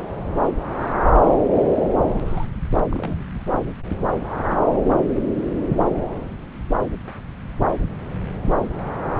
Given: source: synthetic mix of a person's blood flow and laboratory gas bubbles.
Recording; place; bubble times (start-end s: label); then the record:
Doppler ultrasound of blood flow; subclavian vein
2.26-2.45 s: bubbles
2.90-3.23 s: bubbles
From the record:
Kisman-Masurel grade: 121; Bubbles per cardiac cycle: 1 to 2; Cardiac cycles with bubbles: 10 to 50%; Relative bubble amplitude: barely perceptible (0.100 to 0.250); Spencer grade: 2 (many but less than half of the cardiac periods contain bubble signals, singularly or in groups); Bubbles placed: anywhere in the cardiac cycle